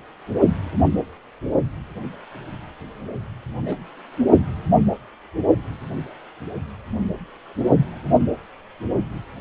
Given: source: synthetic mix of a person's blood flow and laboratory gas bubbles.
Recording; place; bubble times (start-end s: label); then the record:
Doppler ultrasound of blood flow; precordium
3.64-3.75 s: bubbles
From the record:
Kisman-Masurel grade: 111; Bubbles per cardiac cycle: 1 to 2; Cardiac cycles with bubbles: 1 to 10%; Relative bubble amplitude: barely perceptible (0.100 to 0.250); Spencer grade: 1 (occasional bubble signal discernible with the cardiac motion signal, with majority of cardiac periods free of bubbles); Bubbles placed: only in the low amplitude regions of the cardiac cycle